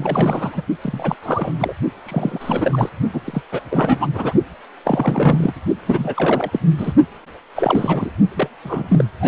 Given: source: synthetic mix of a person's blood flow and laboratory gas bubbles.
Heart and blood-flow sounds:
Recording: Doppler ultrasound of blood flow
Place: precordium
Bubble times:
0.00-0.62 s: bubbles
0.81-1.16 s: bubbles
1.22-1.73 s: bubbles
2.06-2.90 s: bubbles
3.12-3.21 s: bubbles
3.25-3.42 s: bubbles
3.52-3.60 s: bubbles
3.71-4.07 s: bubbles
4.12-4.33 s: bubbles
4.84-5.53 s: bubbles
5.87-6.59 s: bubbles
6.77-6.92 s: bubbles
7.55-8.11 s: bubbles
8.36-8.48 s: bubbles
8.63-9.04 s: bubbles
9.21-9.28 s: bubbles
From the record:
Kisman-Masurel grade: 342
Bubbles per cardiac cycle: rolling drumbeat, 9 or more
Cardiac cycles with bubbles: 100%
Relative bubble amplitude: moderate (0.250 to 0.450)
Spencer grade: 3 (all of the cardiac periods contain showers or single bubble signals, but not dominating or overriding the cardiac motion signals)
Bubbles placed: only in the low amplitude regions of the cardiac cycle

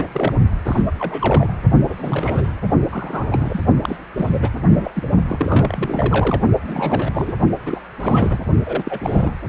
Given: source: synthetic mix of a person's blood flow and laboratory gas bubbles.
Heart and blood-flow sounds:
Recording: Doppler ultrasound of blood flow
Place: precordium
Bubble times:
0.00-0.34 s: bubbles
0.66-0.82 s: bubbles
0.86-0.92 s: bubbles
0.99-1.53 s: bubbles
1.89-2.50 s: bubbles
2.92-3.62 s: bubbles
3.81-3.98 s: bubbles
4.17-4.51 s: bubbles
4.66-4.91 s: bubbles
4.95-5.09 s: bubbles
5.28-6.41 s: bubbles
6.67-7.33 s: bubbles
7.66-7.80 s: bubbles
8.00-8.38 s: bubbles
8.65-9.31 s: bubbles
From the record:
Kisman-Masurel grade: 342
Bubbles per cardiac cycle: rolling drumbeat, 9 or more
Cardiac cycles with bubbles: 100%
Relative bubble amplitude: moderate (0.250 to 0.450)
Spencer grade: 3 (all of the cardiac periods contain showers or single bubble signals, but not dominating or overriding the cardiac motion signals)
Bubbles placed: only in the low amplitude regions of the cardiac cycle

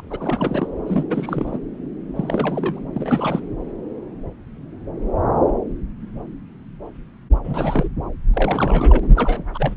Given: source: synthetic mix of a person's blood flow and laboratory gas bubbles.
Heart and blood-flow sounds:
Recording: Doppler ultrasound of blood flow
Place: subclavian vein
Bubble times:
0.00-0.08 s: bubbles
0.10-0.16 s: bubbles
0.20-0.67 s: bubbles
0.86-1.05 s: bubbles
1.10-1.58 s: bubbles
2.15-2.83 s: bubbles
2.93-3.45 s: bubbles
7.43-7.88 s: bubbles
8.33-8.99 s: bubbles
9.02-9.07 s: bubbles
9.15-9.45 s: bubbles
9.54-9.74 s: bubbles
From the record:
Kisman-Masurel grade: 332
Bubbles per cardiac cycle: rolling drumbeat, 9 or more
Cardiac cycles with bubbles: 50 to 99%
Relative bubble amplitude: moderate (0.250 to 0.450)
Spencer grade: 3 (all of the cardiac periods contain showers or single bubble signals, but not dominating or overriding the cardiac motion signals)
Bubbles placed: anywhere in the cardiac cycle

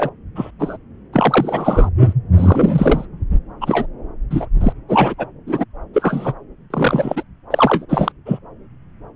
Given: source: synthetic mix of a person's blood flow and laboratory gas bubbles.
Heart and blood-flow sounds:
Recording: Doppler ultrasound of blood flow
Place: subclavian vein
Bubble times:
0.00-0.10 s: bubbles
0.35-0.51 s: bubbles
0.59-0.78 s: bubbles
1.12-1.90 s: bubbles
2.00-2.13 s: bubbles
2.36-3.05 s: bubbles
3.61-3.86 s: bubbles
4.31-4.47 s: bubbles
4.61-4.73 s: bubbles
4.88-5.14 s: bubbles
5.18-5.27 s: bubbles
5.47-5.65 s: bubbles
5.94-6.35 s: bubbles
6.70-7.23 s: bubbles
7.50-7.86 s: bubbles
7.89-8.12 s: bubbles
8.26-8.39 s: bubbles
From the record:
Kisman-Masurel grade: 243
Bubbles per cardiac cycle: several, 3 to 8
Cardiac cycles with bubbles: 100%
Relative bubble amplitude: loud (0.450 to 0.775)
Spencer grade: 3 (all of the cardiac periods contain showers or single bubble signals, but not dominating or overriding the cardiac motion signals)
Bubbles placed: anywhere in the cardiac cycle

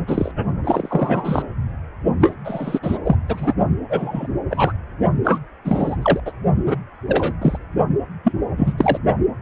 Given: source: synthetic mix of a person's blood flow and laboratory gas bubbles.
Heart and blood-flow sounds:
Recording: Doppler ultrasound of blood flow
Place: precordium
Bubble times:
0.07-0.32 s: bubbles
0.64-1.48 s: bubbles
2.20-2.34 s: bubbles
2.44-2.80 s: bubbles
2.83-2.98 s: bubbles
3.04-3.16 s: bubbles
3.28-3.54 s: bubbles
3.90-4.28 s: bubbles
4.50-4.73 s: bubbles
5.24-5.40 s: bubbles
5.65-6.20 s: bubbles
6.25-6.32 s: bubbles
6.65-6.75 s: bubbles
7.08-7.33 s: bubbles
7.41-7.58 s: bubbles
8.24-8.32 s: bubbles
8.56-8.73 s: bubbles
8.78-8.98 s: bubbles
From the record:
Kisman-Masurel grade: 243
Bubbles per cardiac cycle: several, 3 to 8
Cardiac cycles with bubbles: 100%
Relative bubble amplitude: loud (0.450 to 0.775)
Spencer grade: 3 (all of the cardiac periods contain showers or single bubble signals, but not dominating or overriding the cardiac motion signals)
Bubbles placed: only in the low amplitude regions of the cardiac cycle

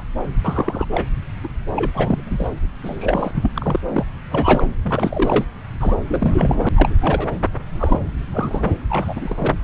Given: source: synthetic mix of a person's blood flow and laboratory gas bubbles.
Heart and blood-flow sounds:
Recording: Doppler ultrasound of blood flow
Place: subclavian vein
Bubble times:
0.00-0.03 s: bubbles
0.45-0.85 s: bubbles
0.93-1.05 s: bubbles
1.43-1.48 s: bubbles
1.76-1.91 s: bubbles
1.93-2.46 s: bubbles
2.83-3.31 s: bubbles
3.34-3.50 s: bubbles
3.55-3.80 s: bubbles
3.95-4.04 s: bubbles
4.31-4.64 s: bubbles
4.83-5.45 s: bubbles
5.80-5.96 s: bubbles
6.08-6.69 s: bubbles
6.75-6.96 s: bubbles
7.00-7.27 s: bubbles
7.79-7.99 s: bubbles
8.33-8.71 s: bubbles
8.89-9.56 s: bubbles
From the record:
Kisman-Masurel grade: 342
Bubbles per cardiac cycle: rolling drumbeat, 9 or more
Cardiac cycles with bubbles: 100%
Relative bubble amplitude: moderate (0.250 to 0.450)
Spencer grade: 3 (all of the cardiac periods contain showers or single bubble signals, but not dominating or overriding the cardiac motion signals)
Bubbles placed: anywhere in the cardiac cycle

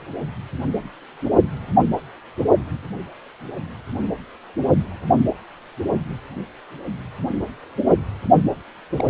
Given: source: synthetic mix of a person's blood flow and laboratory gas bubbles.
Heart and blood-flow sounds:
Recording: Doppler ultrasound of blood flow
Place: precordium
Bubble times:
8.90-9.04 s: bubbles
From the record:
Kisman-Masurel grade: 111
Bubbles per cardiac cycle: 1 to 2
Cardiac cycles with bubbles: 1 to 10%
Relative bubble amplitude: barely perceptible (0.100 to 0.250)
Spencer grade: 1 (occasional bubble signal discernible with the cardiac motion signal, with majority of cardiac periods free of bubbles)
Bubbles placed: only in the low amplitude regions of the cardiac cycle

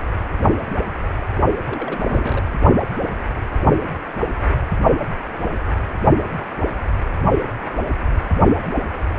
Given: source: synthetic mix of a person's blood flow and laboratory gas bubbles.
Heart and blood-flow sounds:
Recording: Doppler ultrasound of blood flow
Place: precordium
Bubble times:
1.65-2.00 s: bubbles
2.07-2.44 s: bubbles
From the record:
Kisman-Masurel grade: 211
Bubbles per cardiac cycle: several, 3 to 8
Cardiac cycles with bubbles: 1 to 10%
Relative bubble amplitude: barely perceptible (0.100 to 0.250)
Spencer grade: 1 (occasional bubble signal discernible with the cardiac motion signal, with majority of cardiac periods free of bubbles)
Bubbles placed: only in the low amplitude regions of the cardiac cycle

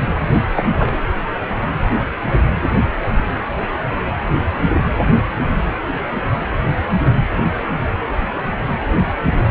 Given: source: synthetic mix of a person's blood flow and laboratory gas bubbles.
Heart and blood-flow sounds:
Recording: Doppler ultrasound of blood flow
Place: precordium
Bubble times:
0.56-0.76 s: bubbles
0.78-1.05 s: bubbles
From the record:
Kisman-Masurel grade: 212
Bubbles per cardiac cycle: several, 3 to 8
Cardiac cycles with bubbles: 1 to 10%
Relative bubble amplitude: moderate (0.250 to 0.450)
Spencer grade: 1 (occasional bubble signal discernible with the cardiac motion signal, with majority of cardiac periods free of bubbles)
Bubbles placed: anywhere in the cardiac cycle

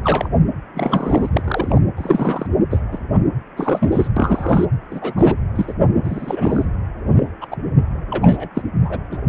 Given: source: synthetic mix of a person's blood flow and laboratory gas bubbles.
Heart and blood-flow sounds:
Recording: Doppler ultrasound of blood flow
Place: precordium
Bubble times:
0.04-0.28 s: bubbles
0.74-1.29 s: bubbles
1.33-1.80 s: bubbles
1.97-2.47 s: bubbles
2.70-2.80 s: bubbles
2.92-2.99 s: bubbles
3.12-3.22 s: bubbles
3.56-4.08 s: bubbles
4.16-4.65 s: bubbles
4.90-5.13 s: bubbles
5.16-5.35 s: bubbles
5.55-5.73 s: bubbles
6.03-6.65 s: bubbles
7.17-7.27 s: bubbles
7.41-7.47 s: bubbles
7.51-7.57 s: bubbles
8.11-8.49 s: bubbles
8.54-8.62 s: bubbles
8.85-8.99 s: bubbles
9.12-9.17 s: bubbles
From the record:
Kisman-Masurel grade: 242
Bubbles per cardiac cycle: several, 3 to 8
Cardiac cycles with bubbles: 100%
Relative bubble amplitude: moderate (0.250 to 0.450)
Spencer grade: 3 (all of the cardiac periods contain showers or single bubble signals, but not dominating or overriding the cardiac motion signals)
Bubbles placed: anywhere in the cardiac cycle

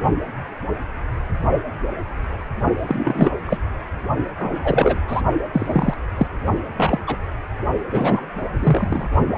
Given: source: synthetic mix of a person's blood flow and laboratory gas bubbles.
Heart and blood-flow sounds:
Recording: Doppler ultrasound of blood flow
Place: precordium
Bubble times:
2.87-3.31 s: bubbles
3.46-3.57 s: bubbles
4.39-4.58 s: bubbles
4.63-5.00 s: bubbles
5.07-5.21 s: bubbles
5.52-5.94 s: bubbles
6.17-6.27 s: bubbles
6.77-6.99 s: bubbles
7.06-7.17 s: bubbles
7.92-8.28 s: bubbles
8.58-9.09 s: bubbles
From the record:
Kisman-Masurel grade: 233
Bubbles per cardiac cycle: several, 3 to 8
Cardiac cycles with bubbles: 50 to 99%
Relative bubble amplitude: loud (0.450 to 0.775)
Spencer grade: 3 (all of the cardiac periods contain showers or single bubble signals, but not dominating or overriding the cardiac motion signals)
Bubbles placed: only in the low amplitude regions of the cardiac cycle

